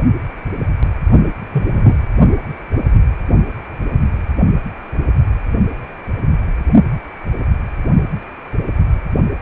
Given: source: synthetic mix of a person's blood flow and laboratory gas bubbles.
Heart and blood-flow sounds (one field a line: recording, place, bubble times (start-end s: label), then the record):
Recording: Doppler ultrasound of blood flow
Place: precordium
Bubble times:
1.52-1.95 s: bubbles
From the record:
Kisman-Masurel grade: 113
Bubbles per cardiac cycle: 1 to 2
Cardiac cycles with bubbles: 1 to 10%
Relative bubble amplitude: loud (0.450 to 0.775)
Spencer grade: 1 (occasional bubble signal discernible with the cardiac motion signal, with majority of cardiac periods free of bubbles)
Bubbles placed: only in the low amplitude regions of the cardiac cycle